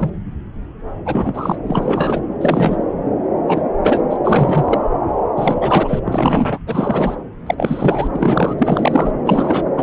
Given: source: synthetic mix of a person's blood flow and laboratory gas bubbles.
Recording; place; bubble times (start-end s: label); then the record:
Doppler ultrasound of blood flow; subclavian vein
0.00-0.10 s: bubbles
1.05-1.58 s: bubbles
1.66-2.20 s: bubbles
2.41-2.85 s: bubbles
3.48-3.62 s: bubbles
3.83-4.00 s: bubbles
4.09-4.17 s: bubbles
4.24-4.81 s: bubbles
5.37-6.00 s: bubbles
6.04-6.58 s: bubbles
6.66-7.16 s: bubbles
7.46-7.54 s: bubbles
7.58-8.55 s: bubbles
8.58-9.11 s: bubbles
9.25-9.69 s: bubbles
9.77-9.83 s: bubbles
From the record:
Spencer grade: 3 (all of the cardiac periods contain showers or single bubble signals, but not dominating or overriding the cardiac motion signals); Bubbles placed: anywhere in the cardiac cycle